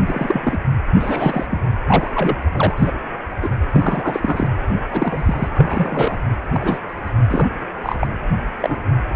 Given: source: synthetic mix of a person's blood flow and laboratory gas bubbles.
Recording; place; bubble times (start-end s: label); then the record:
Doppler ultrasound of blood flow; precordium
0.06-0.58 s: bubbles
0.99-1.46 s: bubbles
1.50-1.61 s: bubbles
1.86-2.11 s: bubbles
2.15-2.36 s: bubbles
2.54-2.92 s: bubbles
3.43-3.50 s: bubbles
3.71-4.49 s: bubbles
4.87-5.49 s: bubbles
5.54-6.17 s: bubbles
6.53-6.78 s: bubbles
7.29-7.49 s: bubbles
7.83-7.97 s: bubbles
8.00-8.07 s: bubbles
8.61-8.77 s: bubbles
From the record:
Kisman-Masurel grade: 242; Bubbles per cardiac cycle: several, 3 to 8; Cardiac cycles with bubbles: 100%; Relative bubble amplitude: moderate (0.250 to 0.450); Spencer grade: 3 (all of the cardiac periods contain showers or single bubble signals, but not dominating or overriding the cardiac motion signals); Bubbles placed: anywhere in the cardiac cycle